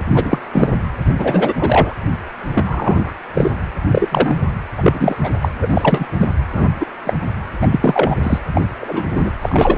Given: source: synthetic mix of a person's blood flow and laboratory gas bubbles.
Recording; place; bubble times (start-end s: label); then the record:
Doppler ultrasound of blood flow; precordium
0.14-0.39 s: bubbles
0.53-0.69 s: bubbles
1.18-1.53 s: bubbles
1.56-1.93 s: bubbles
2.54-3.12 s: bubbles
3.33-3.56 s: bubbles
3.88-4.36 s: bubbles
4.78-5.19 s: bubbles
5.23-5.31 s: bubbles
5.41-5.50 s: bubbles
5.62-5.67 s: bubbles
5.70-6.08 s: bubbles
6.18-6.28 s: bubbles
6.53-6.69 s: bubbles
6.79-6.86 s: bubbles
7.05-7.17 s: bubbles
7.61-7.67 s: bubbles
7.71-8.17 s: bubbles
8.23-8.38 s: bubbles
8.54-8.62 s: bubbles
8.80-9.31 s: bubbles
9.42-9.78 s: bubbles
From the record:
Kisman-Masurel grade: 243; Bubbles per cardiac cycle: several, 3 to 8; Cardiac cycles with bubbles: 100%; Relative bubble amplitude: loud (0.450 to 0.775); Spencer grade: 3 (all of the cardiac periods contain showers or single bubble signals, but not dominating or overriding the cardiac motion signals); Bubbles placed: anywhere in the cardiac cycle